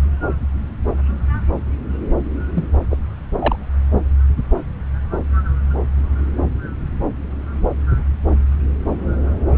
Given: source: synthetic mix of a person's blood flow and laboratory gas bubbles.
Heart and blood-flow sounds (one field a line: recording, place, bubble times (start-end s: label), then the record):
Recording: Doppler ultrasound of blood flow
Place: subclavian vein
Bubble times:
2.56-2.66 s: bubbles
2.90-2.97 s: bubbles
3.39-3.56 s: bubbles
From the record:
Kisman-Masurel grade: 213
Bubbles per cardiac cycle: several, 3 to 8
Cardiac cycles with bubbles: 1 to 10%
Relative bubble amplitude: loud (0.450 to 0.775)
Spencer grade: 1 (occasional bubble signal discernible with the cardiac motion signal, with majority of cardiac periods free of bubbles)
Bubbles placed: anywhere in the cardiac cycle